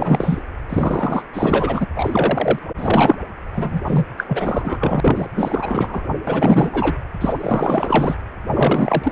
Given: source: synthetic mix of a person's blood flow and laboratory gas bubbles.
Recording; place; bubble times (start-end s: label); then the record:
Doppler ultrasound of blood flow; precordium
0.00-0.42 s: bubbles
0.69-1.23 s: bubbles
1.33-1.86 s: bubbles
1.96-2.59 s: bubbles
2.77-3.15 s: bubbles
3.52-3.81 s: bubbles
3.85-4.05 s: bubbles
4.17-5.28 s: bubbles
5.35-6.11 s: bubbles
6.27-6.95 s: bubbles
7.21-8.16 s: bubbles
8.50-9.12 s: bubbles
From the record:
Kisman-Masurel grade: 444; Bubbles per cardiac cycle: continuous sound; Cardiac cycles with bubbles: 100%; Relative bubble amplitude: maximal (0.775 to 0.999); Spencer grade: 4 (maximum detectable bubble signal sounding continuously throughout systole and diastole of every cardiac period, and overriding the amplitude of the normal cardiac signals); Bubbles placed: anywhere in the cardiac cycle